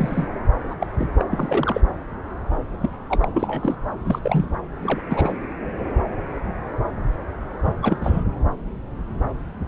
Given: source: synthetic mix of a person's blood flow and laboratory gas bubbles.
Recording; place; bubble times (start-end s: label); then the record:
Doppler ultrasound of blood flow; subclavian vein
0.00-0.27 s: bubbles
0.70-0.75 s: bubbles
0.80-0.86 s: bubbles
0.97-1.07 s: bubbles
1.19-1.24 s: bubbles
1.31-1.81 s: bubbles
2.80-2.91 s: bubbles
3.09-3.28 s: bubbles
3.33-3.76 s: bubbles
4.06-4.19 s: bubbles
4.22-4.46 s: bubbles
4.83-5.01 s: bubbles
5.09-5.34 s: bubbles
7.65-7.75 s: bubbles
7.82-7.98 s: bubbles
8.00-8.23 s: bubbles
From the record:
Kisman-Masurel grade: 222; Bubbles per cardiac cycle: several, 3 to 8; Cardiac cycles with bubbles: 10 to 50%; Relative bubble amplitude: moderate (0.250 to 0.450); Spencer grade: 2 (many but less than half of the cardiac periods contain bubble signals, singularly or in groups); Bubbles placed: anywhere in the cardiac cycle